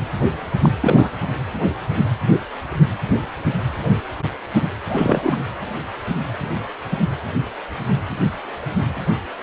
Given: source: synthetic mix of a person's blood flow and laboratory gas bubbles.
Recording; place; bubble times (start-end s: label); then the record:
Doppler ultrasound of blood flow; precordium
0.61-0.72 s: bubbles
0.80-1.10 s: bubbles
4.89-5.36 s: bubbles
From the record:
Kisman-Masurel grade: 212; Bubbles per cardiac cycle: several, 3 to 8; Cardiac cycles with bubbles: 1 to 10%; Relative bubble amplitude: moderate (0.250 to 0.450); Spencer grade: 1 (occasional bubble signal discernible with the cardiac motion signal, with majority of cardiac periods free of bubbles); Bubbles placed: anywhere in the cardiac cycle